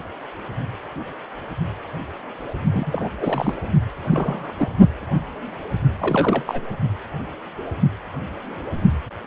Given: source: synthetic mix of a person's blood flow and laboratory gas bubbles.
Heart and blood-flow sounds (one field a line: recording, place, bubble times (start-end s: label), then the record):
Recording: Doppler ultrasound of blood flow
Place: precordium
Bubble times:
2.72-3.09 s: bubbles
3.19-3.54 s: bubbles
4.10-4.52 s: bubbles
4.57-4.68 s: bubbles
5.98-6.43 s: bubbles
6.46-6.61 s: bubbles
From the record:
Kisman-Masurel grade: 222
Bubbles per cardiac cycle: several, 3 to 8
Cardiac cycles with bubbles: 10 to 50%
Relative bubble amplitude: moderate (0.250 to 0.450)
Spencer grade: 2 (many but less than half of the cardiac periods contain bubble signals, singularly or in groups)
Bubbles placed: only in the low amplitude regions of the cardiac cycle